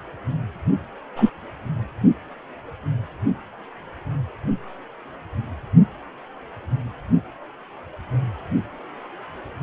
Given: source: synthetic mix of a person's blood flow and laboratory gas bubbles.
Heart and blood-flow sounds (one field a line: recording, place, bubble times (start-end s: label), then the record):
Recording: Doppler ultrasound of blood flow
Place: precordium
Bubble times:
1.16-1.31 s: bubbles
From the record:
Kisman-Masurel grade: 113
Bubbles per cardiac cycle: 1 to 2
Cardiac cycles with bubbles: 1 to 10%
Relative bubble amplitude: loud (0.450 to 0.775)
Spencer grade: 1 (occasional bubble signal discernible with the cardiac motion signal, with majority of cardiac periods free of bubbles)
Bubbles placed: only in the low amplitude regions of the cardiac cycle